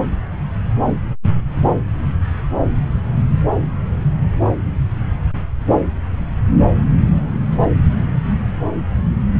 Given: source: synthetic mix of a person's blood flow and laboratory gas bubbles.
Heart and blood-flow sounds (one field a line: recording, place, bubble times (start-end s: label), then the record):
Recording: Doppler ultrasound of blood flow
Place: subclavian vein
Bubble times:
no bubbles
From the record:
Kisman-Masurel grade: 000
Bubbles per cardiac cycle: 0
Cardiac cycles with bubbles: 0%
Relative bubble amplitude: no bubbles discernible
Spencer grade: 0 (complete lack of bubble signals)